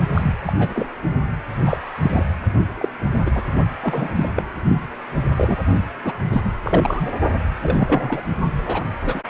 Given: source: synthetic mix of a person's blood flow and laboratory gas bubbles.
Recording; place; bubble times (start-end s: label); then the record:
Doppler ultrasound of blood flow; precordium
0.14-0.35 s: bubbles
0.45-0.88 s: bubbles
1.66-1.77 s: bubbles
2.02-2.25 s: bubbles
2.77-2.88 s: bubbles
3.26-3.30 s: bubbles
3.33-3.42 s: bubbles
3.82-4.29 s: bubbles
4.36-4.42 s: bubbles
5.36-5.55 s: bubbles
6.03-6.17 s: bubbles
6.32-6.41 s: bubbles
6.44-6.52 s: bubbles
6.62-7.10 s: bubbles
7.62-8.23 s: bubbles
8.65-8.84 s: bubbles
9.01-9.21 s: bubbles
From the record:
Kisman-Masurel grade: 242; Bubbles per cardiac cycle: several, 3 to 8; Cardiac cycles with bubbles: 100%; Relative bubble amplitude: moderate (0.250 to 0.450); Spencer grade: 3 (all of the cardiac periods contain showers or single bubble signals, but not dominating or overriding the cardiac motion signals); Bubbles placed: only in the low amplitude regions of the cardiac cycle